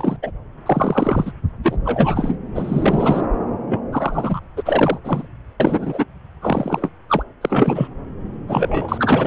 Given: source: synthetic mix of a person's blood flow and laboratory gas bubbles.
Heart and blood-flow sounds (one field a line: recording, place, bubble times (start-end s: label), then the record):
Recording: Doppler ultrasound of blood flow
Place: subclavian vein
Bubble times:
0.00-0.16 s: bubbles
0.22-0.31 s: bubbles
0.66-1.32 s: bubbles
1.62-1.77 s: bubbles
1.84-2.36 s: bubbles
2.55-3.27 s: bubbles
3.67-3.81 s: bubbles
3.92-4.40 s: bubbles
4.56-4.98 s: bubbles
5.04-5.27 s: bubbles
5.60-6.04 s: bubbles
6.41-6.89 s: bubbles
7.09-7.23 s: bubbles
7.41-7.88 s: bubbles
8.48-9.27 s: bubbles
From the record:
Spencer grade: 3 (all of the cardiac periods contain showers or single bubble signals, but not dominating or overriding the cardiac motion signals)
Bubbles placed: anywhere in the cardiac cycle